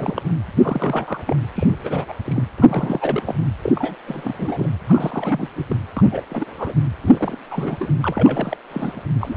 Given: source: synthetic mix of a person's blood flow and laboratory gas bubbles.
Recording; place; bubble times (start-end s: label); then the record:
Doppler ultrasound of blood flow; precordium
0.00-0.22 s: bubbles
0.57-1.23 s: bubbles
1.27-1.36 s: bubbles
1.56-1.76 s: bubbles
1.84-2.05 s: bubbles
2.08-2.13 s: bubbles
2.24-2.43 s: bubbles
2.56-3.46 s: bubbles
3.61-3.96 s: bubbles
4.07-4.35 s: bubbles
4.38-4.68 s: bubbles
4.88-5.50 s: bubbles
5.56-5.66 s: bubbles
5.69-5.77 s: bubbles
5.96-6.25 s: bubbles
6.29-6.75 s: bubbles
7.00-7.39 s: bubbles
7.47-7.89 s: bubbles
8.01-8.57 s: bubbles
8.69-9.03 s: bubbles
9.21-9.36 s: bubbles
From the record:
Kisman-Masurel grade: 342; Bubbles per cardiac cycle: rolling drumbeat, 9 or more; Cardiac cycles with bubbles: 100%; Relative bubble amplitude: moderate (0.250 to 0.450); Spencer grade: 3 (all of the cardiac periods contain showers or single bubble signals, but not dominating or overriding the cardiac motion signals); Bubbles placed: anywhere in the cardiac cycle